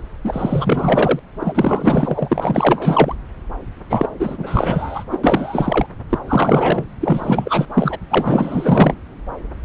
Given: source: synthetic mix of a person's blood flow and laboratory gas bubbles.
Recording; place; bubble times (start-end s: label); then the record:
Doppler ultrasound of blood flow; subclavian vein
0.24-1.19 s: bubbles
1.40-3.15 s: bubbles
3.90-4.09 s: bubbles
4.19-5.04 s: bubbles
5.11-5.18 s: bubbles
5.23-5.86 s: bubbles
6.09-6.18 s: bubbles
6.27-6.86 s: bubbles
7.00-7.66 s: bubbles
7.73-7.97 s: bubbles
8.09-8.95 s: bubbles
From the record:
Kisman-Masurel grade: 444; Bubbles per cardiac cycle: continuous sound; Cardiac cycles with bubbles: 100%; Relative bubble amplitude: maximal (0.775 to 0.999); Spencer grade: 4 (maximum detectable bubble signal sounding continuously throughout systole and diastole of every cardiac period, and overriding the amplitude of the normal cardiac signals); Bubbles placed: anywhere in the cardiac cycle